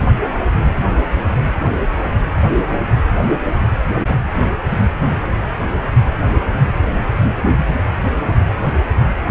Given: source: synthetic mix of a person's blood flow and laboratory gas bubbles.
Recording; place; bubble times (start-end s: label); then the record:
Doppler ultrasound of blood flow; precordium
no bubbles
From the record:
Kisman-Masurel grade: 000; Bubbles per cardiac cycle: 0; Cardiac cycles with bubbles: 0%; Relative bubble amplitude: no bubbles discernible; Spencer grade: 0 (complete lack of bubble signals)